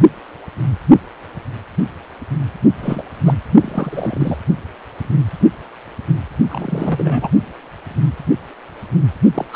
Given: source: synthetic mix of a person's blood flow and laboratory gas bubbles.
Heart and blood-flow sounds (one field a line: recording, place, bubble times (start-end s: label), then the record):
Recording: Doppler ultrasound of blood flow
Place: precordium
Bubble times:
2.81-3.03 s: bubbles
3.26-3.36 s: bubbles
3.60-4.38 s: bubbles
6.50-7.29 s: bubbles
9.34-9.46 s: bubbles
9.53-9.56 s: bubbles
From the record:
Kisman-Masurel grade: 222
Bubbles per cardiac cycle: several, 3 to 8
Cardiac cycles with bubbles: 10 to 50%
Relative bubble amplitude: moderate (0.250 to 0.450)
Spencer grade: 2 (many but less than half of the cardiac periods contain bubble signals, singularly or in groups)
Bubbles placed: only in the low amplitude regions of the cardiac cycle